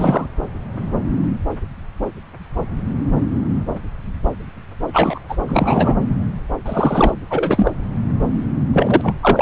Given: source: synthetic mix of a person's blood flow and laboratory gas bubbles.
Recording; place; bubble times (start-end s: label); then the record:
Doppler ultrasound of blood flow; subclavian vein
0.00-0.30 s: bubbles
4.93-5.20 s: bubbles
5.29-5.38 s: bubbles
5.46-5.96 s: bubbles
6.66-7.14 s: bubbles
7.30-7.71 s: bubbles
8.72-9.14 s: bubbles
9.21-9.42 s: bubbles
From the record:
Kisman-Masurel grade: 233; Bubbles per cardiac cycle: several, 3 to 8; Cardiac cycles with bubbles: 50 to 99%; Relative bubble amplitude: loud (0.450 to 0.775); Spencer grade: 3 (all of the cardiac periods contain showers or single bubble signals, but not dominating or overriding the cardiac motion signals); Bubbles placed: anywhere in the cardiac cycle